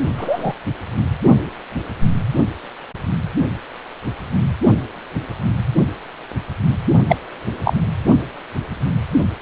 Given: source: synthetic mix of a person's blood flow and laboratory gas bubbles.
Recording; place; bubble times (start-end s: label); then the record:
Doppler ultrasound of blood flow; precordium
0.17-0.55 s: bubbles
7.07-7.16 s: bubbles
7.64-7.74 s: bubbles
From the record:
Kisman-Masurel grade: 123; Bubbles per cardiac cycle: 1 to 2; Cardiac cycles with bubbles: 10 to 50%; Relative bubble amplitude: loud (0.450 to 0.775); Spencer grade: 2 (many but less than half of the cardiac periods contain bubble signals, singularly or in groups); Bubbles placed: only in the low amplitude regions of the cardiac cycle